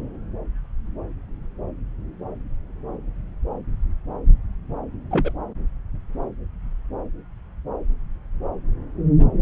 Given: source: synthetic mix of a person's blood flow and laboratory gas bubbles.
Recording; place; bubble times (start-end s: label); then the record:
Doppler ultrasound of blood flow; subclavian vein
5.10-5.32 s: bubbles
From the record:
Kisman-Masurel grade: 212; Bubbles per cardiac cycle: several, 3 to 8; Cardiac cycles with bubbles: 1 to 10%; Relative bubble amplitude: moderate (0.250 to 0.450); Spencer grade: 1 (occasional bubble signal discernible with the cardiac motion signal, with majority of cardiac periods free of bubbles); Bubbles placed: anywhere in the cardiac cycle